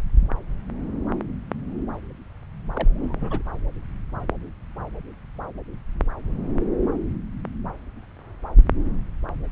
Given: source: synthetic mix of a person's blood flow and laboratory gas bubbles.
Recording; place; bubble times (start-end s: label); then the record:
Doppler ultrasound of blood flow; subclavian vein
2.74-2.88 s: bubbles
2.95-3.13 s: bubbles
3.16-3.42 s: bubbles
From the record:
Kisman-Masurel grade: 211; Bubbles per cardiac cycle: several, 3 to 8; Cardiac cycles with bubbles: 1 to 10%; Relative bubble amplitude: barely perceptible (0.100 to 0.250); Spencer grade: 1 (occasional bubble signal discernible with the cardiac motion signal, with majority of cardiac periods free of bubbles); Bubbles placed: anywhere in the cardiac cycle